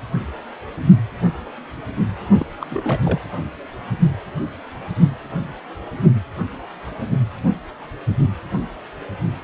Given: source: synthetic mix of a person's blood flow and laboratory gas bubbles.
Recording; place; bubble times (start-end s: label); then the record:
Doppler ultrasound of blood flow; precordium
2.39-2.46 s: bubbles
2.60-2.67 s: bubbles
2.71-3.21 s: bubbles
From the record:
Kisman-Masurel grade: 221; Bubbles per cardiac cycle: several, 3 to 8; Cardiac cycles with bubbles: 10 to 50%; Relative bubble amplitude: barely perceptible (0.100 to 0.250); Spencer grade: 2 (many but less than half of the cardiac periods contain bubble signals, singularly or in groups); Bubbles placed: anywhere in the cardiac cycle